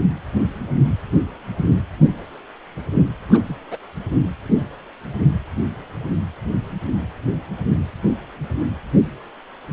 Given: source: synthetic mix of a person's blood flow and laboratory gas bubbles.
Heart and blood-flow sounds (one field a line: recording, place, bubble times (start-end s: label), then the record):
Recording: Doppler ultrasound of blood flow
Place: precordium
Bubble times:
3.29-3.56 s: bubbles
3.71-3.78 s: bubbles
4.22-4.27 s: bubbles
From the record:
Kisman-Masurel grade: 221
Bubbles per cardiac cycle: several, 3 to 8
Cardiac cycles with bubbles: 10 to 50%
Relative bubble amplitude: barely perceptible (0.100 to 0.250)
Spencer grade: 2 (many but less than half of the cardiac periods contain bubble signals, singularly or in groups)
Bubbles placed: anywhere in the cardiac cycle